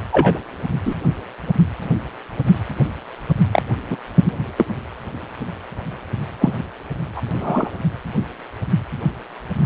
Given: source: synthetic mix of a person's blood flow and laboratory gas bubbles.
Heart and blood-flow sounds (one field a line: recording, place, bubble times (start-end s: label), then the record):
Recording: Doppler ultrasound of blood flow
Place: precordium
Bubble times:
0.12-0.39 s: bubbles
0.84-0.95 s: bubbles
3.52-3.62 s: bubbles
3.90-3.97 s: bubbles
4.57-4.65 s: bubbles
6.40-6.53 s: bubbles
7.17-7.22 s: bubbles
7.30-7.69 s: bubbles
From the record:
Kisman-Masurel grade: 123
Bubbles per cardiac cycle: 1 to 2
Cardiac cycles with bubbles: 10 to 50%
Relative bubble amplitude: loud (0.450 to 0.775)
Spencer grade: 2 (many but less than half of the cardiac periods contain bubble signals, singularly or in groups)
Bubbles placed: anywhere in the cardiac cycle